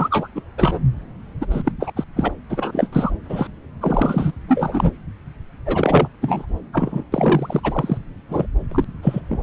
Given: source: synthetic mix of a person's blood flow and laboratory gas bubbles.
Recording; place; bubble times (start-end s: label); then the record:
Doppler ultrasound of blood flow; subclavian vein
0.00-0.28 s: bubbles
0.35-0.41 s: bubbles
0.57-0.79 s: bubbles
1.41-1.47 s: bubbles
1.50-1.72 s: bubbles
1.80-1.92 s: bubbles
1.96-2.04 s: bubbles
2.16-2.31 s: bubbles
2.49-2.88 s: bubbles
2.92-3.11 s: bubbles
3.29-3.48 s: bubbles
3.81-4.33 s: bubbles
4.47-4.91 s: bubbles
5.66-6.08 s: bubbles
6.21-6.46 s: bubbles
6.72-7.04 s: bubbles
7.12-7.60 s: bubbles
7.63-7.97 s: bubbles
8.29-8.46 s: bubbles
8.71-8.85 s: bubbles
9.02-9.20 s: bubbles
9.29-9.43 s: bubbles
From the record:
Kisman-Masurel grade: 343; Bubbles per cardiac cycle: rolling drumbeat, 9 or more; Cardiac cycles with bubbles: 100%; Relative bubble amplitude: loud (0.450 to 0.775); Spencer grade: 3 (all of the cardiac periods contain showers or single bubble signals, but not dominating or overriding the cardiac motion signals); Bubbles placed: anywhere in the cardiac cycle